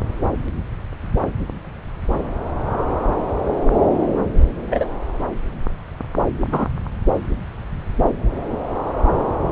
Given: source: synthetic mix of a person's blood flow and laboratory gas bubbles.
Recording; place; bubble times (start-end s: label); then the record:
Doppler ultrasound of blood flow; subclavian vein
4.46-4.87 s: bubbles
6.52-6.69 s: bubbles
From the record:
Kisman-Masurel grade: 123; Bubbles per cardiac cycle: 1 to 2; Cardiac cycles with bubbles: 10 to 50%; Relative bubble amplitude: loud (0.450 to 0.775); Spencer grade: 2 (many but less than half of the cardiac periods contain bubble signals, singularly or in groups); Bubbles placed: anywhere in the cardiac cycle